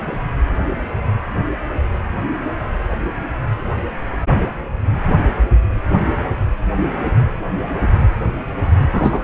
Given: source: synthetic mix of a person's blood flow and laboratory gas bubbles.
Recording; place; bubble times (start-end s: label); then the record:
Doppler ultrasound of blood flow; precordium
8.92-9.21 s: bubbles
From the record:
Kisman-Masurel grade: 113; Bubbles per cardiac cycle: 1 to 2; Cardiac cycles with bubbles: 1 to 10%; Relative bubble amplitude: loud (0.450 to 0.775); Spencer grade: 1 (occasional bubble signal discernible with the cardiac motion signal, with majority of cardiac periods free of bubbles); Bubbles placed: anywhere in the cardiac cycle